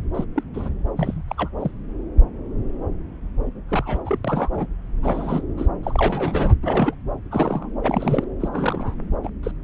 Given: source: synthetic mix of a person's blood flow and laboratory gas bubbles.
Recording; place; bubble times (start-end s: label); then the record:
Doppler ultrasound of blood flow; subclavian vein
0.14-0.24 s: bubbles
0.35-0.44 s: bubbles
0.54-0.69 s: bubbles
0.96-1.23 s: bubbles
1.27-1.49 s: bubbles
1.59-1.71 s: bubbles
3.69-4.02 s: bubbles
4.05-4.19 s: bubbles
4.25-4.67 s: bubbles
5.02-5.43 s: bubbles
5.58-5.67 s: bubbles
5.83-6.53 s: bubbles
6.62-6.95 s: bubbles
7.31-7.68 s: bubbles
7.83-8.24 s: bubbles
8.40-8.49 s: bubbles
8.52-8.96 s: bubbles
9.23-9.29 s: bubbles
9.43-9.52 s: bubbles
From the record:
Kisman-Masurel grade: 232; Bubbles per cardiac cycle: several, 3 to 8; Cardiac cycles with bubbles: 50 to 99%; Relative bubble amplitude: moderate (0.250 to 0.450); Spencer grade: 3 (all of the cardiac periods contain showers or single bubble signals, but not dominating or overriding the cardiac motion signals); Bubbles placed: anywhere in the cardiac cycle